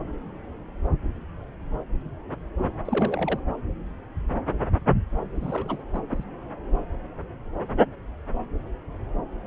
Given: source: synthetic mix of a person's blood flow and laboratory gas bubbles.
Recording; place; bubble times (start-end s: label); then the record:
Doppler ultrasound of blood flow; subclavian vein
2.85-3.40 s: bubbles
5.35-5.81 s: bubbles
5.93-6.03 s: bubbles
6.09-6.24 s: bubbles
From the record:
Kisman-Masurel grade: 212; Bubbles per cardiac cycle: several, 3 to 8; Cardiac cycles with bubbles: 1 to 10%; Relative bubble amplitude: moderate (0.250 to 0.450); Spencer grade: 1 (occasional bubble signal discernible with the cardiac motion signal, with majority of cardiac periods free of bubbles); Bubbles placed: anywhere in the cardiac cycle